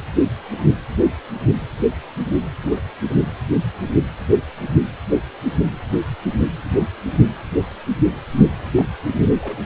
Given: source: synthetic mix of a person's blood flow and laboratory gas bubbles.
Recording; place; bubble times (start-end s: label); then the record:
Doppler ultrasound of blood flow; precordium
2.63-2.80 s: bubbles
8.77-8.89 s: bubbles
9.41-9.58 s: bubbles
From the record:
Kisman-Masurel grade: 121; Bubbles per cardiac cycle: 1 to 2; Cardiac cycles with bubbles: 10 to 50%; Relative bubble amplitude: barely perceptible (0.100 to 0.250); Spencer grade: 2 (many but less than half of the cardiac periods contain bubble signals, singularly or in groups); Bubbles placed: anywhere in the cardiac cycle